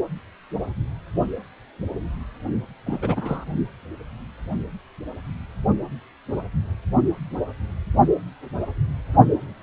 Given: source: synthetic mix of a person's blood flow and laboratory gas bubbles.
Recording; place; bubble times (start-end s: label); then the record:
Doppler ultrasound of blood flow; precordium
2.86-3.44 s: bubbles
From the record:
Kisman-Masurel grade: 222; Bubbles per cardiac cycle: several, 3 to 8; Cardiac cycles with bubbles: 10 to 50%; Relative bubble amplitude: moderate (0.250 to 0.450); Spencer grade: 2 (many but less than half of the cardiac periods contain bubble signals, singularly or in groups); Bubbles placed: only in the low amplitude regions of the cardiac cycle